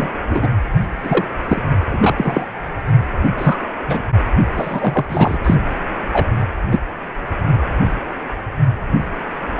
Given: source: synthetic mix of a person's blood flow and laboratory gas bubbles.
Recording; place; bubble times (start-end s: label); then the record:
Doppler ultrasound of blood flow; precordium
0.00-0.09 s: bubbles
0.29-0.47 s: bubbles
1.03-1.25 s: bubbles
1.49-1.62 s: bubbles
1.89-2.46 s: bubbles
3.38-3.58 s: bubbles
3.87-4.04 s: bubbles
4.55-5.05 s: bubbles
5.09-5.39 s: bubbles
5.44-5.55 s: bubbles
6.12-6.26 s: bubbles
6.71-6.79 s: bubbles
From the record:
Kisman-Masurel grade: 233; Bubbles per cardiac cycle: several, 3 to 8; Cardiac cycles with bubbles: 50 to 99%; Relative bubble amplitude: loud (0.450 to 0.775); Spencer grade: 3 (all of the cardiac periods contain showers or single bubble signals, but not dominating or overriding the cardiac motion signals); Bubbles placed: anywhere in the cardiac cycle